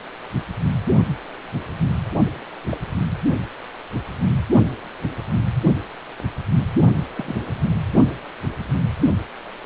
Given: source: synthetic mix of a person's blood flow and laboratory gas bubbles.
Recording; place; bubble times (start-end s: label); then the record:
Doppler ultrasound of blood flow; precordium
2.69-2.77 s: bubbles
7.17-7.52 s: bubbles
From the record:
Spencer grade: 2 (many but less than half of the cardiac periods contain bubble signals, singularly or in groups); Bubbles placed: only in the low amplitude regions of the cardiac cycle